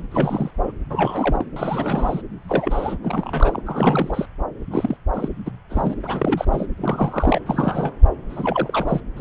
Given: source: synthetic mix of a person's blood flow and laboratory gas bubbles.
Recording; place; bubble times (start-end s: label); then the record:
Doppler ultrasound of blood flow; subclavian vein
0.11-0.51 s: bubbles
0.63-0.72 s: bubbles
0.90-1.44 s: bubbles
1.56-2.22 s: bubbles
2.48-2.96 s: bubbles
3.03-3.61 s: bubbles
3.66-4.25 s: bubbles
4.71-4.97 s: bubbles
5.14-5.29 s: bubbles
5.46-5.50 s: bubbles
5.70-5.95 s: bubbles
6.03-6.45 s: bubbles
6.52-6.66 s: bubbles
6.77-7.40 s: bubbles
7.46-7.93 s: bubbles
8.29-9.00 s: bubbles
9.16-9.21 s: bubbles
From the record:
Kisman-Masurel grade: 242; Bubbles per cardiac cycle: several, 3 to 8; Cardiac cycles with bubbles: 100%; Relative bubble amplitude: moderate (0.250 to 0.450); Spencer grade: 3 (all of the cardiac periods contain showers or single bubble signals, but not dominating or overriding the cardiac motion signals); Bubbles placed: anywhere in the cardiac cycle